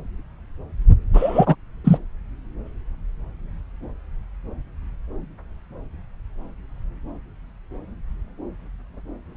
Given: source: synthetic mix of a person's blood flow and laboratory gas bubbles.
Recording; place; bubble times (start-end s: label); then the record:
Doppler ultrasound of blood flow; subclavian vein
1.14-1.55 s: bubbles
1.84-1.98 s: bubbles
From the record:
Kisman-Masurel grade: 213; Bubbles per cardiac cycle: several, 3 to 8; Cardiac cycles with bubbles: 1 to 10%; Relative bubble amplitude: loud (0.450 to 0.775); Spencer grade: 1 (occasional bubble signal discernible with the cardiac motion signal, with majority of cardiac periods free of bubbles); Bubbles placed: anywhere in the cardiac cycle